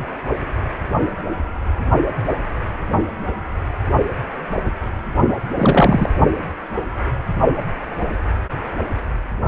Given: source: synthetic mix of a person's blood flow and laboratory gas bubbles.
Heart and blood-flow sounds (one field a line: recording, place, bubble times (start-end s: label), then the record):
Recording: Doppler ultrasound of blood flow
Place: precordium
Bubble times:
5.57-6.09 s: bubbles
From the record:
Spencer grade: 1 (occasional bubble signal discernible with the cardiac motion signal, with majority of cardiac periods free of bubbles)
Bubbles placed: only in the low amplitude regions of the cardiac cycle